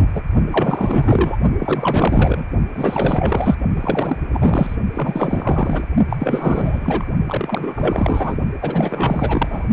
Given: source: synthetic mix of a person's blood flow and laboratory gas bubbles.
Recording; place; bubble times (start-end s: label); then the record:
Doppler ultrasound of blood flow; precordium
0.00-0.07 s: bubbles
0.14-0.22 s: bubbles
0.51-1.36 s: bubbles
1.58-2.44 s: bubbles
2.75-3.56 s: bubbles
3.75-4.16 s: bubbles
4.33-4.76 s: bubbles
4.95-5.87 s: bubbles
6.09-6.17 s: bubbles
6.19-7.08 s: bubbles
7.26-8.36 s: bubbles
8.62-9.65 s: bubbles
From the record:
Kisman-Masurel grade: 444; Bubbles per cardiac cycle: continuous sound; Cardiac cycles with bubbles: 100%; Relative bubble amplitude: maximal (0.775 to 0.999); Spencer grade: 4 (maximum detectable bubble signal sounding continuously throughout systole and diastole of every cardiac period, and overriding the amplitude of the normal cardiac signals); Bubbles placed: only in the low amplitude regions of the cardiac cycle